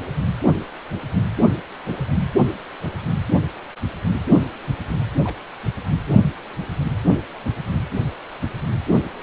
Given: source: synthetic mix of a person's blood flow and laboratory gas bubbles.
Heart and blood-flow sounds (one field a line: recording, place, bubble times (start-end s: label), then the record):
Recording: Doppler ultrasound of blood flow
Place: precordium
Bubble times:
5.23-5.37 s: bubbles
From the record:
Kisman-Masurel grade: 111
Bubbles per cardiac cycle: 1 to 2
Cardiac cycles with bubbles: 1 to 10%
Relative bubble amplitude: barely perceptible (0.100 to 0.250)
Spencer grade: 1 (occasional bubble signal discernible with the cardiac motion signal, with majority of cardiac periods free of bubbles)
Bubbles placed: anywhere in the cardiac cycle